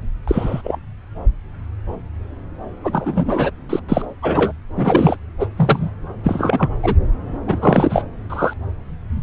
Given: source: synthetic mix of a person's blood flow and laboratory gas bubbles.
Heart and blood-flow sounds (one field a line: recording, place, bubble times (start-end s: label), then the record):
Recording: Doppler ultrasound of blood flow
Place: subclavian vein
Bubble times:
0.28-0.78 s: bubbles
2.83-3.51 s: bubbles
3.69-3.79 s: bubbles
3.88-4.05 s: bubbles
4.22-4.53 s: bubbles
4.75-5.17 s: bubbles
5.39-5.46 s: bubbles
5.57-5.91 s: bubbles
6.24-6.69 s: bubbles
6.83-6.96 s: bubbles
7.46-8.04 s: bubbles
8.29-8.54 s: bubbles
From the record:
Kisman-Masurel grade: 233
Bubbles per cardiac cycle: several, 3 to 8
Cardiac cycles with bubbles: 50 to 99%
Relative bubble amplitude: loud (0.450 to 0.775)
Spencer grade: 3 (all of the cardiac periods contain showers or single bubble signals, but not dominating or overriding the cardiac motion signals)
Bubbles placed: anywhere in the cardiac cycle